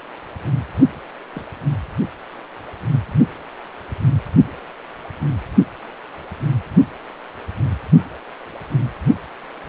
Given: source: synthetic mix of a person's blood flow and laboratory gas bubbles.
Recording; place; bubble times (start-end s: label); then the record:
Doppler ultrasound of blood flow; precordium
1.34-1.45 s: bubbles
From the record:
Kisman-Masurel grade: 121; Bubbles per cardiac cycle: 1 to 2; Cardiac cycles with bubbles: 10 to 50%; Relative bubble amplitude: barely perceptible (0.100 to 0.250); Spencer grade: 2 (many but less than half of the cardiac periods contain bubble signals, singularly or in groups); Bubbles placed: only in the low amplitude regions of the cardiac cycle